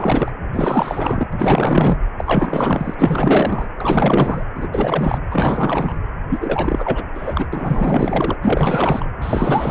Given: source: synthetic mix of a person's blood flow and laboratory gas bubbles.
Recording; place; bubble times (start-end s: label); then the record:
Doppler ultrasound of blood flow; precordium
0.00-0.32 s: bubbles
0.53-1.28 s: bubbles
1.33-1.97 s: bubbles
2.17-2.94 s: bubbles
2.99-3.67 s: bubbles
3.77-4.43 s: bubbles
4.54-4.68 s: bubbles
4.71-5.18 s: bubbles
5.30-5.97 s: bubbles
6.29-7.04 s: bubbles
7.14-7.47 s: bubbles
7.52-8.36 s: bubbles
8.41-9.10 s: bubbles
9.21-9.71 s: bubbles
From the record:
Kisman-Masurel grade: 444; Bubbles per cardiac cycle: continuous sound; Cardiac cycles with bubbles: 100%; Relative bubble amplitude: maximal (0.775 to 0.999); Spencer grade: 4 (maximum detectable bubble signal sounding continuously throughout systole and diastole of every cardiac period, and overriding the amplitude of the normal cardiac signals); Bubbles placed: anywhere in the cardiac cycle